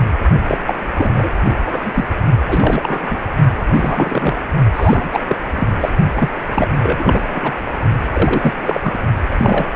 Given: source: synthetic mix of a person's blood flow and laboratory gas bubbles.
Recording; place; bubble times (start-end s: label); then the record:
Doppler ultrasound of blood flow; precordium
0.48-0.59 s: bubbles
0.67-0.74 s: bubbles
0.97-1.34 s: bubbles
1.44-1.62 s: bubbles
1.66-2.05 s: bubbles
2.48-3.19 s: bubbles
3.57-4.35 s: bubbles
4.74-5.09 s: bubbles
5.12-5.21 s: bubbles
5.23-5.37 s: bubbles
5.55-5.68 s: bubbles
5.80-5.89 s: bubbles
6.16-6.29 s: bubbles
6.54-6.68 s: bubbles
6.82-7.22 s: bubbles
7.28-7.54 s: bubbles
8.13-8.54 s: bubbles
8.62-8.99 s: bubbles
9.30-9.66 s: bubbles
From the record:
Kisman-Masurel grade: 343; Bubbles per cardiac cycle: rolling drumbeat, 9 or more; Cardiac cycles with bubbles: 100%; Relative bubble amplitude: loud (0.450 to 0.775); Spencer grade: 3 (all of the cardiac periods contain showers or single bubble signals, but not dominating or overriding the cardiac motion signals); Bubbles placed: only in the low amplitude regions of the cardiac cycle